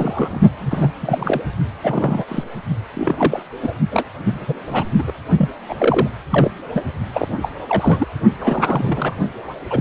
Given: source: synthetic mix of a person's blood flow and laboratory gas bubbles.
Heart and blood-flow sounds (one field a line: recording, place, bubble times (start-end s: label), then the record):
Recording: Doppler ultrasound of blood flow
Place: precordium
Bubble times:
0.00-0.39 s: bubbles
0.56-0.93 s: bubbles
1.01-1.42 s: bubbles
1.82-2.25 s: bubbles
2.28-2.44 s: bubbles
2.95-3.43 s: bubbles
3.62-3.73 s: bubbles
3.91-4.04 s: bubbles
4.24-4.54 s: bubbles
4.67-4.84 s: bubbles
4.98-5.03 s: bubbles
5.07-5.13 s: bubbles
5.37-5.49 s: bubbles
5.68-5.75 s: bubbles
5.78-6.08 s: bubbles
6.30-6.51 s: bubbles
6.73-6.82 s: bubbles
7.13-7.28 s: bubbles
7.42-7.49 s: bubbles
7.69-8.07 s: bubbles
8.39-9.15 s: bubbles
9.70-9.81 s: bubbles
From the record:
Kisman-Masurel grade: 342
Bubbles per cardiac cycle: rolling drumbeat, 9 or more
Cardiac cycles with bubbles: 100%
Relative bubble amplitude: moderate (0.250 to 0.450)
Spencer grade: 3 (all of the cardiac periods contain showers or single bubble signals, but not dominating or overriding the cardiac motion signals)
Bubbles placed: only in the low amplitude regions of the cardiac cycle